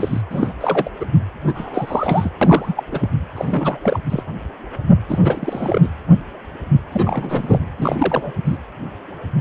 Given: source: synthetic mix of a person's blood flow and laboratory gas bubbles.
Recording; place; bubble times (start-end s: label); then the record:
Doppler ultrasound of blood flow; precordium
0.00-0.21 s: bubbles
0.30-0.53 s: bubbles
0.60-0.90 s: bubbles
0.99-1.05 s: bubbles
1.43-2.31 s: bubbles
2.41-2.83 s: bubbles
2.92-3.08 s: bubbles
3.34-3.78 s: bubbles
3.83-3.98 s: bubbles
4.09-4.23 s: bubbles
5.08-5.89 s: bubbles
6.92-7.61 s: bubbles
7.77-8.32 s: bubbles
8.45-8.58 s: bubbles
From the record:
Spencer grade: 3 (all of the cardiac periods contain showers or single bubble signals, but not dominating or overriding the cardiac motion signals); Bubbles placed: anywhere in the cardiac cycle